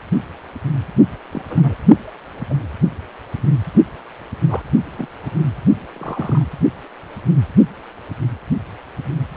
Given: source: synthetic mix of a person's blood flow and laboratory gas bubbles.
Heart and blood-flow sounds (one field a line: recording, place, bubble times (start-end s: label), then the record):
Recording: Doppler ultrasound of blood flow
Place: precordium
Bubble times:
1.31-1.42 s: bubbles
1.49-1.75 s: bubbles
2.50-2.55 s: bubbles
4.49-4.62 s: bubbles
4.98-5.07 s: bubbles
5.21-5.48 s: bubbles
5.95-6.44 s: bubbles
From the record:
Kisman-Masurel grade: 121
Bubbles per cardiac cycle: 1 to 2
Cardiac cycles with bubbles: 10 to 50%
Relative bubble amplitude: barely perceptible (0.100 to 0.250)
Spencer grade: 2 (many but less than half of the cardiac periods contain bubble signals, singularly or in groups)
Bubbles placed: only in the low amplitude regions of the cardiac cycle